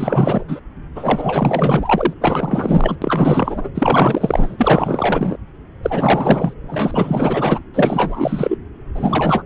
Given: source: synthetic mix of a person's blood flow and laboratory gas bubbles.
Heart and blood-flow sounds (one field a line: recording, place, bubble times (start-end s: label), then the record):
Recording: Doppler ultrasound of blood flow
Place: subclavian vein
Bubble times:
0.00-0.43 s: bubbles
0.48-0.59 s: bubbles
0.95-2.13 s: bubbles
2.20-2.96 s: bubbles
3.01-3.69 s: bubbles
3.75-5.37 s: bubbles
5.83-6.54 s: bubbles
6.67-7.60 s: bubbles
7.74-8.56 s: bubbles
8.94-9.43 s: bubbles
From the record:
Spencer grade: 4 (maximum detectable bubble signal sounding continuously throughout systole and diastole of every cardiac period, and overriding the amplitude of the normal cardiac signals)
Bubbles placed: anywhere in the cardiac cycle